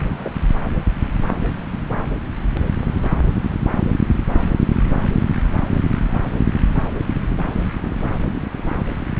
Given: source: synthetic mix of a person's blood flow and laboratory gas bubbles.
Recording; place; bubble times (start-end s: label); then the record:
Doppler ultrasound of blood flow; subclavian vein
0.24-0.30 s: bubbles
From the record:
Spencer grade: 1 (occasional bubble signal discernible with the cardiac motion signal, with majority of cardiac periods free of bubbles); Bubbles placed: anywhere in the cardiac cycle